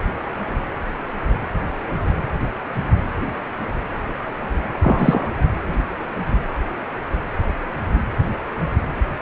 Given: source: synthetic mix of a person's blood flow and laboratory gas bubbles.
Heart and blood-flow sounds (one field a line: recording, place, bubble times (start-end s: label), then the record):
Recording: Doppler ultrasound of blood flow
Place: precordium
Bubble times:
4.82-5.29 s: bubbles
From the record:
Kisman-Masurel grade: 213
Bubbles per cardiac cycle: several, 3 to 8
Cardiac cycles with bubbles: 1 to 10%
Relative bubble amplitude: loud (0.450 to 0.775)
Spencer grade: 1 (occasional bubble signal discernible with the cardiac motion signal, with majority of cardiac periods free of bubbles)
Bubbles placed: anywhere in the cardiac cycle